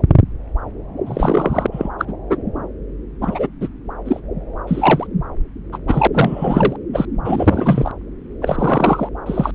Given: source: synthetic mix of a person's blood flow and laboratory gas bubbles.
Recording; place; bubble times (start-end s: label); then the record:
Doppler ultrasound of blood flow; subclavian vein
1.06-1.67 s: bubbles
1.72-1.89 s: bubbles
1.99-2.05 s: bubbles
2.08-2.13 s: bubbles
2.30-2.38 s: bubbles
3.21-3.47 s: bubbles
3.60-3.69 s: bubbles
4.05-4.20 s: bubbles
4.67-5.07 s: bubbles
5.72-5.79 s: bubbles
5.87-6.07 s: bubbles
6.13-6.76 s: bubbles
6.92-7.06 s: bubbles
7.25-7.92 s: bubbles
8.41-9.09 s: bubbles
9.26-9.51 s: bubbles
From the record:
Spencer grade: 3 (all of the cardiac periods contain showers or single bubble signals, but not dominating or overriding the cardiac motion signals); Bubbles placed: anywhere in the cardiac cycle